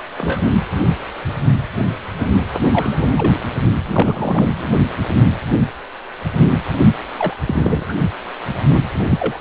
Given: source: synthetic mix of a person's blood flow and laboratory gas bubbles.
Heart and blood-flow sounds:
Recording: Doppler ultrasound of blood flow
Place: precordium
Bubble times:
0.18-0.51 s: bubbles
2.71-3.12 s: bubbles
3.17-3.32 s: bubbles
3.84-4.69 s: bubbles
7.17-7.33 s: bubbles
7.46-7.83 s: bubbles
7.88-7.94 s: bubbles
8.52-8.79 s: bubbles
8.94-9.38 s: bubbles
From the record:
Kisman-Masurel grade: 232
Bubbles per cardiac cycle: several, 3 to 8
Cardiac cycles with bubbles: 50 to 99%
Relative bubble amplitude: moderate (0.250 to 0.450)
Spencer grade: 3 (all of the cardiac periods contain showers or single bubble signals, but not dominating or overriding the cardiac motion signals)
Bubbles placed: anywhere in the cardiac cycle

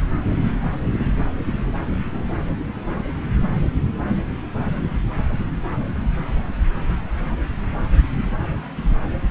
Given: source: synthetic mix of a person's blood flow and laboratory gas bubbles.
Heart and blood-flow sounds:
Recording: Doppler ultrasound of blood flow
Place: subclavian vein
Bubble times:
no bubbles
From the record:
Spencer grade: 0 (complete lack of bubble signals)

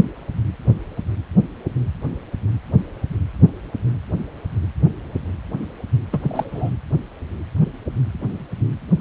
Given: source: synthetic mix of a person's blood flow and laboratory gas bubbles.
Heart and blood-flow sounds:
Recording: Doppler ultrasound of blood flow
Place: precordium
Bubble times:
6.12-6.70 s: bubbles
From the record:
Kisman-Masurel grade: 212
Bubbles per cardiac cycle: several, 3 to 8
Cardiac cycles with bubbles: 1 to 10%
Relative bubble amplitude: moderate (0.250 to 0.450)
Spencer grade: 1 (occasional bubble signal discernible with the cardiac motion signal, with majority of cardiac periods free of bubbles)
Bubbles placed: anywhere in the cardiac cycle

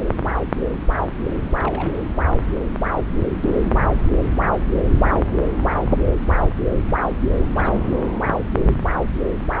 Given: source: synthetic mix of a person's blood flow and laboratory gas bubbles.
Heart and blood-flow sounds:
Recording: Doppler ultrasound of blood flow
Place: subclavian vein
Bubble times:
1.57-2.00 s: bubbles
7.53-8.02 s: bubbles
From the record:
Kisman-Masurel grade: 211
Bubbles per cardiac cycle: several, 3 to 8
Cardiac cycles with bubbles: 1 to 10%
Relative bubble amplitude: barely perceptible (0.100 to 0.250)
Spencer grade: 1 (occasional bubble signal discernible with the cardiac motion signal, with majority of cardiac periods free of bubbles)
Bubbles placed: anywhere in the cardiac cycle

